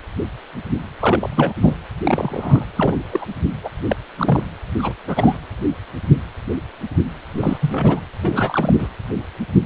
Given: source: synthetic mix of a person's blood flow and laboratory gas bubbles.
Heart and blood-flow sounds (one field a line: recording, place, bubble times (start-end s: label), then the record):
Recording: Doppler ultrasound of blood flow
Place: precordium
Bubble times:
1.01-1.53 s: bubbles
1.62-1.77 s: bubbles
2.01-2.65 s: bubbles
2.76-2.95 s: bubbles
3.10-3.25 s: bubbles
3.63-3.69 s: bubbles
3.89-3.96 s: bubbles
4.18-4.43 s: bubbles
4.78-4.93 s: bubbles
5.08-5.38 s: bubbles
7.32-8.02 s: bubbles
8.21-8.76 s: bubbles
8.79-8.88 s: bubbles
From the record:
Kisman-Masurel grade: 232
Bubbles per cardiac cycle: several, 3 to 8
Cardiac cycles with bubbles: 50 to 99%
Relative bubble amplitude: moderate (0.250 to 0.450)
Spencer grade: 3 (all of the cardiac periods contain showers or single bubble signals, but not dominating or overriding the cardiac motion signals)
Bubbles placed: anywhere in the cardiac cycle